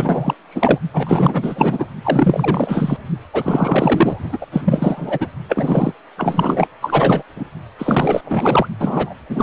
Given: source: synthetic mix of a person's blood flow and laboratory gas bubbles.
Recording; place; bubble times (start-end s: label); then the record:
Doppler ultrasound of blood flow; precordium
0.00-0.34 s: bubbles
0.50-0.78 s: bubbles
0.93-1.85 s: bubbles
2.03-2.98 s: bubbles
3.33-4.38 s: bubbles
4.41-4.46 s: bubbles
4.51-4.62 s: bubbles
4.64-5.27 s: bubbles
5.48-5.93 s: bubbles
6.17-6.67 s: bubbles
6.81-7.22 s: bubbles
7.35-7.45 s: bubbles
7.78-8.21 s: bubbles
8.25-8.67 s: bubbles
8.79-9.14 s: bubbles
9.29-9.43 s: bubbles
From the record:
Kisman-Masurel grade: 444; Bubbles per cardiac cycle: continuous sound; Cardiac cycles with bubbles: 100%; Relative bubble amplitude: maximal (0.775 to 0.999); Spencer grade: 4 (maximum detectable bubble signal sounding continuously throughout systole and diastole of every cardiac period, and overriding the amplitude of the normal cardiac signals); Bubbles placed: only in the low amplitude regions of the cardiac cycle